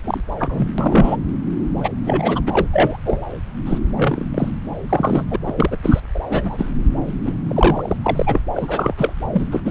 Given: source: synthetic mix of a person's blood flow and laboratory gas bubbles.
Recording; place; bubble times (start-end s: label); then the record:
Doppler ultrasound of blood flow; subclavian vein
0.04-0.20 s: bubbles
0.39-0.68 s: bubbles
0.78-1.17 s: bubbles
1.77-1.89 s: bubbles
2.03-2.41 s: bubbles
2.46-2.67 s: bubbles
2.73-2.97 s: bubbles
3.06-3.22 s: bubbles
3.66-3.79 s: bubbles
3.96-4.25 s: bubbles
4.34-4.50 s: bubbles
4.89-5.24 s: bubbles
5.30-5.36 s: bubbles
5.43-5.76 s: bubbles
5.83-6.00 s: bubbles
6.14-6.20 s: bubbles
6.29-6.70 s: bubbles
7.24-7.34 s: bubbles
7.48-7.97 s: bubbles
8.02-8.40 s: bubbles
8.55-8.94 s: bubbles
8.97-9.13 s: bubbles
9.33-9.47 s: bubbles
9.51-9.61 s: bubbles
9.65-9.71 s: bubbles
From the record:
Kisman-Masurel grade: 243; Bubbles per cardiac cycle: several, 3 to 8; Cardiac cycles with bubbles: 100%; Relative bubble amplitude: loud (0.450 to 0.775); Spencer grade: 3 (all of the cardiac periods contain showers or single bubble signals, but not dominating or overriding the cardiac motion signals); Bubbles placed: anywhere in the cardiac cycle